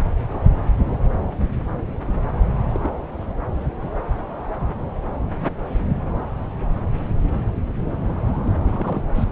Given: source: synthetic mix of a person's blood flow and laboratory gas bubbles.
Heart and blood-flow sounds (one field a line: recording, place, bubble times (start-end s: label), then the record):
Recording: Doppler ultrasound of blood flow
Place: subclavian vein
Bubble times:
0.30-0.40 s: bubbles
2.69-2.80 s: bubbles
2.83-2.89 s: bubbles
3.84-3.89 s: bubbles
8.43-8.53 s: bubbles
8.64-9.03 s: bubbles
9.14-9.25 s: bubbles
From the record:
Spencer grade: 2 (many but less than half of the cardiac periods contain bubble signals, singularly or in groups)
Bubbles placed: anywhere in the cardiac cycle